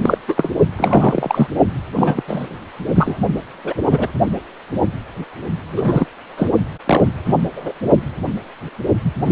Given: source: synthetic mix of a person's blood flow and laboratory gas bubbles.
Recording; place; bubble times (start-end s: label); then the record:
Doppler ultrasound of blood flow; precordium
0.02-0.18 s: bubbles
0.28-0.51 s: bubbles
0.78-1.48 s: bubbles
1.96-2.23 s: bubbles
2.27-2.48 s: bubbles
2.95-3.18 s: bubbles
3.64-3.73 s: bubbles
3.90-4.07 s: bubbles
5.69-6.06 s: bubbles
6.37-6.50 s: bubbles
6.85-7.04 s: bubbles
7.24-7.34 s: bubbles
7.55-7.72 s: bubbles
9.04-9.12 s: bubbles
9.25-9.32 s: bubbles
From the record:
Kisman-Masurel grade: 233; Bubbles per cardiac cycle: several, 3 to 8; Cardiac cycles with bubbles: 50 to 99%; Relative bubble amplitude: loud (0.450 to 0.775); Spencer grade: 3 (all of the cardiac periods contain showers or single bubble signals, but not dominating or overriding the cardiac motion signals); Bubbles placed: only in the low amplitude regions of the cardiac cycle